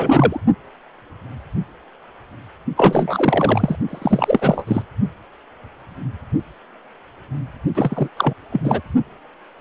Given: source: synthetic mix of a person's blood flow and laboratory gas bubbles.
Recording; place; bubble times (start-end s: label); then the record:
Doppler ultrasound of blood flow; precordium
0.00-0.40 s: bubbles
2.77-3.76 s: bubbles
3.88-4.65 s: bubbles
4.67-4.82 s: bubbles
7.75-8.07 s: bubbles
8.16-8.33 s: bubbles
8.52-8.60 s: bubbles
8.63-8.81 s: bubbles
From the record:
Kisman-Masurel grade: 333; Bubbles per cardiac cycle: rolling drumbeat, 9 or more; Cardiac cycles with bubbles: 50 to 99%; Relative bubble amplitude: loud (0.450 to 0.775); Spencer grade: 3 (all of the cardiac periods contain showers or single bubble signals, but not dominating or overriding the cardiac motion signals); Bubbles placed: only in the low amplitude regions of the cardiac cycle